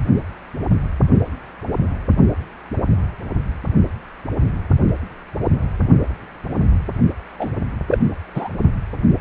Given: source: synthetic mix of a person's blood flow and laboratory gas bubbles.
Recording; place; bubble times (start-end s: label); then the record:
Doppler ultrasound of blood flow; precordium
7.39-7.49 s: bubbles
7.90-7.98 s: bubbles
8.34-8.49 s: bubbles
From the record:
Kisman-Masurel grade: 213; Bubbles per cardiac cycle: several, 3 to 8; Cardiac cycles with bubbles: 1 to 10%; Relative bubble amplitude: loud (0.450 to 0.775); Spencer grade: 1 (occasional bubble signal discernible with the cardiac motion signal, with majority of cardiac periods free of bubbles); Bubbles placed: only in the low amplitude regions of the cardiac cycle